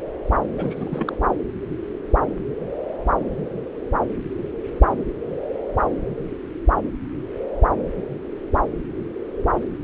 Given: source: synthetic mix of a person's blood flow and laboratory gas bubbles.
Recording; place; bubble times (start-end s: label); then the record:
Doppler ultrasound of blood flow; subclavian vein
0.55-1.17 s: bubbles
From the record:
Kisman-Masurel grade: 211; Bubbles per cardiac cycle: several, 3 to 8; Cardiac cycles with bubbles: 1 to 10%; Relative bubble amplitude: barely perceptible (0.100 to 0.250); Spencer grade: 1 (occasional bubble signal discernible with the cardiac motion signal, with majority of cardiac periods free of bubbles); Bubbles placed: anywhere in the cardiac cycle